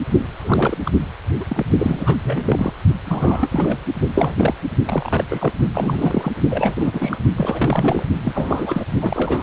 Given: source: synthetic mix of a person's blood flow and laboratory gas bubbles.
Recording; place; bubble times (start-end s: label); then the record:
Doppler ultrasound of blood flow; precordium
0.39-0.77 s: bubbles
0.85-0.91 s: bubbles
1.40-1.44 s: bubbles
1.48-1.65 s: bubbles
1.79-2.17 s: bubbles
2.23-2.73 s: bubbles
3.05-3.79 s: bubbles
4.13-4.55 s: bubbles
4.84-5.24 s: bubbles
5.29-5.52 s: bubbles
5.74-6.32 s: bubbles
6.50-7.18 s: bubbles
7.36-8.04 s: bubbles
8.23-8.86 s: bubbles
9.00-9.43 s: bubbles
From the record:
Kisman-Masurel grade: 342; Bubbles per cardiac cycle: rolling drumbeat, 9 or more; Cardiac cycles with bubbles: 100%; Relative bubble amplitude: moderate (0.250 to 0.450); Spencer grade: 3 (all of the cardiac periods contain showers or single bubble signals, but not dominating or overriding the cardiac motion signals); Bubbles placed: only in the low amplitude regions of the cardiac cycle